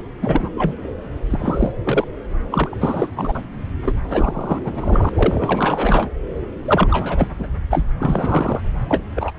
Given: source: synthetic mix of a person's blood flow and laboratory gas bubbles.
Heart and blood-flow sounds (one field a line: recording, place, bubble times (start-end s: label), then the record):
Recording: Doppler ultrasound of blood flow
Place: subclavian vein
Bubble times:
0.21-0.49 s: bubbles
0.55-0.77 s: bubbles
1.30-1.72 s: bubbles
1.83-2.04 s: bubbles
2.52-2.77 s: bubbles
2.81-3.07 s: bubbles
3.16-3.41 s: bubbles
3.85-3.95 s: bubbles
4.08-4.62 s: bubbles
4.65-5.10 s: bubbles
5.15-6.09 s: bubbles
6.65-6.88 s: bubbles
6.91-7.28 s: bubbles
7.39-7.47 s: bubbles
7.70-7.85 s: bubbles
8.00-8.61 s: bubbles
8.88-9.03 s: bubbles
9.16-9.32 s: bubbles
From the record:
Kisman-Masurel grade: 342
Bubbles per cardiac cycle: rolling drumbeat, 9 or more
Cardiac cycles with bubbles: 100%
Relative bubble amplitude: moderate (0.250 to 0.450)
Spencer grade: 3 (all of the cardiac periods contain showers or single bubble signals, but not dominating or overriding the cardiac motion signals)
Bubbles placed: anywhere in the cardiac cycle